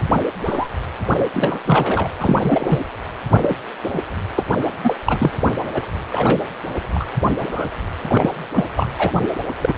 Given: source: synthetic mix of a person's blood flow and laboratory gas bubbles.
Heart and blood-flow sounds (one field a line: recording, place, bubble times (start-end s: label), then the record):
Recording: Doppler ultrasound of blood flow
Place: precordium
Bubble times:
0.10-0.21 s: bubbles
0.43-0.68 s: bubbles
1.34-1.59 s: bubbles
1.66-2.10 s: bubbles
2.17-2.83 s: bubbles
3.38-3.56 s: bubbles
3.83-4.03 s: bubbles
4.35-4.43 s: bubbles
4.83-4.94 s: bubbles
5.05-5.31 s: bubbles
5.74-5.82 s: bubbles
6.10-6.45 s: bubbles
6.95-7.07 s: bubbles
7.42-7.66 s: bubbles
8.07-8.34 s: bubbles
8.54-8.65 s: bubbles
8.76-8.88 s: bubbles
8.99-9.12 s: bubbles
9.22-9.28 s: bubbles
9.61-9.73 s: bubbles
From the record:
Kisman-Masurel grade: 242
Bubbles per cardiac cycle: several, 3 to 8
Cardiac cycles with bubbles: 100%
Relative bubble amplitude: moderate (0.250 to 0.450)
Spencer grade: 3 (all of the cardiac periods contain showers or single bubble signals, but not dominating or overriding the cardiac motion signals)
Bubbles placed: anywhere in the cardiac cycle